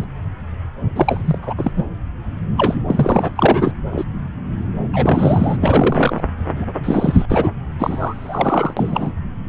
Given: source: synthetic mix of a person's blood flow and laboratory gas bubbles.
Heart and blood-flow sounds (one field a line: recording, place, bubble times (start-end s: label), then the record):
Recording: Doppler ultrasound of blood flow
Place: subclavian vein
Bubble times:
0.00-0.04 s: bubbles
0.95-1.38 s: bubbles
1.42-1.53 s: bubbles
1.57-1.71 s: bubbles
1.76-1.85 s: bubbles
2.57-2.83 s: bubbles
2.88-3.32 s: bubbles
3.35-3.71 s: bubbles
3.92-4.04 s: bubbles
4.92-5.57 s: bubbles
5.61-6.24 s: bubbles
6.55-6.66 s: bubbles
6.83-7.25 s: bubbles
7.29-7.51 s: bubbles
7.79-8.74 s: bubbles
8.77-9.12 s: bubbles
From the record:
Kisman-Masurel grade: 333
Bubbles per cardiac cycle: rolling drumbeat, 9 or more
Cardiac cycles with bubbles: 50 to 99%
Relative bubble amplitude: loud (0.450 to 0.775)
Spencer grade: 3 (all of the cardiac periods contain showers or single bubble signals, but not dominating or overriding the cardiac motion signals)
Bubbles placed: anywhere in the cardiac cycle